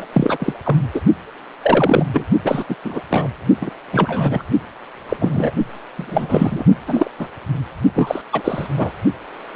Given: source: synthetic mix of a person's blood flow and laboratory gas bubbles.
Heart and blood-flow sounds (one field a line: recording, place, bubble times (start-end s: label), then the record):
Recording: Doppler ultrasound of blood flow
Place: precordium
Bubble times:
0.00-0.06 s: bubbles
0.12-0.53 s: bubbles
0.64-0.77 s: bubbles
0.93-1.01 s: bubbles
1.62-2.06 s: bubbles
2.13-2.25 s: bubbles
2.44-2.65 s: bubbles
2.69-2.75 s: bubbles
2.84-3.00 s: bubbles
3.10-3.28 s: bubbles
3.61-3.70 s: bubbles
3.92-4.42 s: bubbles
5.08-5.52 s: bubbles
5.96-6.64 s: bubbles
6.87-7.10 s: bubbles
7.18-7.28 s: bubbles
7.95-8.22 s: bubbles
8.32-8.67 s: bubbles
8.77-8.92 s: bubbles
9.54-9.56 s: bubbles
From the record:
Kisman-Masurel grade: 243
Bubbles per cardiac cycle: several, 3 to 8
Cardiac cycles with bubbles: 100%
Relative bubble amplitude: loud (0.450 to 0.775)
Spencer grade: 3 (all of the cardiac periods contain showers or single bubble signals, but not dominating or overriding the cardiac motion signals)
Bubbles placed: only in the low amplitude regions of the cardiac cycle